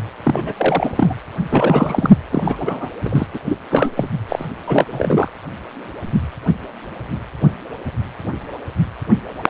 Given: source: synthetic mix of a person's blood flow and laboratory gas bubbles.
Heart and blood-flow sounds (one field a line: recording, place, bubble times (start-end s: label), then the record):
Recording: Doppler ultrasound of blood flow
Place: precordium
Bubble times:
0.24-0.55 s: bubbles
0.57-1.14 s: bubbles
1.49-2.10 s: bubbles
2.30-2.89 s: bubbles
3.04-3.27 s: bubbles
3.33-3.39 s: bubbles
3.45-3.58 s: bubbles
3.70-3.91 s: bubbles
3.96-4.09 s: bubbles
4.29-4.45 s: bubbles
4.67-4.87 s: bubbles
4.90-5.31 s: bubbles
From the record:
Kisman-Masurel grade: 332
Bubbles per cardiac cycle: rolling drumbeat, 9 or more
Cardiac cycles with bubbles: 50 to 99%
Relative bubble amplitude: moderate (0.250 to 0.450)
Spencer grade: 3 (all of the cardiac periods contain showers or single bubble signals, but not dominating or overriding the cardiac motion signals)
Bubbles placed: anywhere in the cardiac cycle